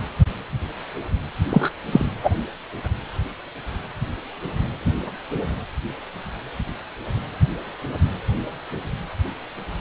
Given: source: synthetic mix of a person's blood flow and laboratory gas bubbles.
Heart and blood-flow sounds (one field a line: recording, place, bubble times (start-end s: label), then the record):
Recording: Doppler ultrasound of blood flow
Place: precordium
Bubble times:
1.49-1.70 s: bubbles
1.92-2.06 s: bubbles
2.23-2.31 s: bubbles
From the record:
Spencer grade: 1 (occasional bubble signal discernible with the cardiac motion signal, with majority of cardiac periods free of bubbles)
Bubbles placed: anywhere in the cardiac cycle